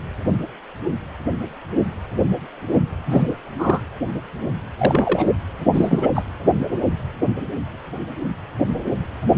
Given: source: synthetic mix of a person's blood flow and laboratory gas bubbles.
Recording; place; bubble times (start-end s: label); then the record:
Doppler ultrasound of blood flow; precordium
3.06-3.35 s: bubbles
3.58-3.81 s: bubbles
4.78-5.31 s: bubbles
5.72-6.09 s: bubbles
6.14-6.23 s: bubbles
From the record:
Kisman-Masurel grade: 222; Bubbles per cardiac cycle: several, 3 to 8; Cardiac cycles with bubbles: 10 to 50%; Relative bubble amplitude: moderate (0.250 to 0.450); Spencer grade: 2 (many but less than half of the cardiac periods contain bubble signals, singularly or in groups); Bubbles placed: anywhere in the cardiac cycle